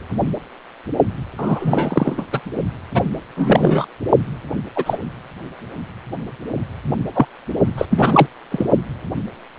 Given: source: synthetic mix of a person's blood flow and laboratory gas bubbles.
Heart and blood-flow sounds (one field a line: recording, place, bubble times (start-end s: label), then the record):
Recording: Doppler ultrasound of blood flow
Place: precordium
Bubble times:
1.38-2.25 s: bubbles
2.32-2.40 s: bubbles
2.94-3.02 s: bubbles
3.37-3.86 s: bubbles
4.75-4.98 s: bubbles
7.14-7.26 s: bubbles
7.78-7.86 s: bubbles
7.90-8.27 s: bubbles
8.51-8.65 s: bubbles
From the record:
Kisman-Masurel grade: 233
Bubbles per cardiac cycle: several, 3 to 8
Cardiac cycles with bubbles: 50 to 99%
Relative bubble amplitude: loud (0.450 to 0.775)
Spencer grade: 3 (all of the cardiac periods contain showers or single bubble signals, but not dominating or overriding the cardiac motion signals)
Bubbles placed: only in the low amplitude regions of the cardiac cycle